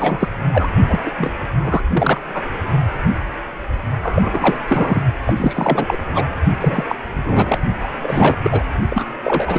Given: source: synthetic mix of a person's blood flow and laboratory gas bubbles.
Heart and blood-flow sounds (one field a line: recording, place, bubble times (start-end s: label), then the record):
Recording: Doppler ultrasound of blood flow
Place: precordium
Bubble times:
0.00-0.31 s: bubbles
0.53-0.69 s: bubbles
0.88-0.99 s: bubbles
1.06-1.10 s: bubbles
1.17-1.31 s: bubbles
1.58-1.81 s: bubbles
1.92-2.21 s: bubbles
2.23-2.44 s: bubbles
4.03-4.56 s: bubbles
4.67-5.02 s: bubbles
5.25-5.34 s: bubbles
5.37-5.97 s: bubbles
6.15-6.26 s: bubbles
6.61-6.96 s: bubbles
7.14-7.58 s: bubbles
7.80-7.89 s: bubbles
8.02-8.63 s: bubbles
8.88-9.07 s: bubbles
9.23-9.59 s: bubbles
From the record:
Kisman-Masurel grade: 333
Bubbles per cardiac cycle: rolling drumbeat, 9 or more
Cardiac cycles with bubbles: 50 to 99%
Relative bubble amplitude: loud (0.450 to 0.775)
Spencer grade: 3 (all of the cardiac periods contain showers or single bubble signals, but not dominating or overriding the cardiac motion signals)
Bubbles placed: only in the low amplitude regions of the cardiac cycle